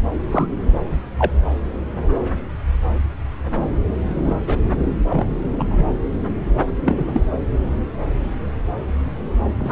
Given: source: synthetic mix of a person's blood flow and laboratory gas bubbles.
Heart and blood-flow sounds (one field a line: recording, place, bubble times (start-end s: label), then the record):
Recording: Doppler ultrasound of blood flow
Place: subclavian vein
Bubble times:
0.31-0.47 s: bubbles
1.18-1.31 s: bubbles
4.24-4.34 s: bubbles
4.46-4.58 s: bubbles
5.08-5.46 s: bubbles
5.58-5.83 s: bubbles
6.85-7.24 s: bubbles
9.60-9.72 s: bubbles
From the record:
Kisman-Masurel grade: 122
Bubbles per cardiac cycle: 1 to 2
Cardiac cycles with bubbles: 10 to 50%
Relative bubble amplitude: moderate (0.250 to 0.450)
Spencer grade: 2 (many but less than half of the cardiac periods contain bubble signals, singularly or in groups)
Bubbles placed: anywhere in the cardiac cycle